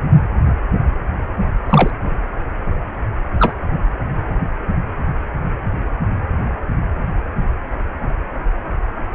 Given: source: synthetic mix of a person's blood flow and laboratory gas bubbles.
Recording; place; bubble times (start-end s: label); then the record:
Doppler ultrasound of blood flow; precordium
1.69-1.91 s: bubbles
3.39-3.54 s: bubbles
From the record:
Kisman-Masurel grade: 113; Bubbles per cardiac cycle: 1 to 2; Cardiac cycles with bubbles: 1 to 10%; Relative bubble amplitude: loud (0.450 to 0.775); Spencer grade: 1 (occasional bubble signal discernible with the cardiac motion signal, with majority of cardiac periods free of bubbles); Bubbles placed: anywhere in the cardiac cycle